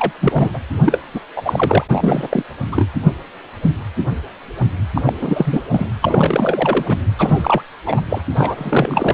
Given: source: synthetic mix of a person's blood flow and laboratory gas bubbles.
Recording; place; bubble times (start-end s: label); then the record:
Doppler ultrasound of blood flow; precordium
0.00-0.12 s: bubbles
0.21-0.51 s: bubbles
0.53-0.60 s: bubbles
0.84-0.99 s: bubbles
1.14-1.20 s: bubbles
1.35-1.84 s: bubbles
1.92-2.43 s: bubbles
2.72-2.89 s: bubbles
4.95-5.13 s: bubbles
5.21-5.62 s: bubbles
5.71-5.87 s: bubbles
6.02-6.97 s: bubbles
7.19-7.62 s: bubbles
7.86-8.02 s: bubbles
8.10-8.21 s: bubbles
8.36-9.14 s: bubbles
From the record:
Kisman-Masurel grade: 333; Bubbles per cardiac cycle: rolling drumbeat, 9 or more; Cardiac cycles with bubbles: 50 to 99%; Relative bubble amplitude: loud (0.450 to 0.775); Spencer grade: 3 (all of the cardiac periods contain showers or single bubble signals, but not dominating or overriding the cardiac motion signals); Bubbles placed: anywhere in the cardiac cycle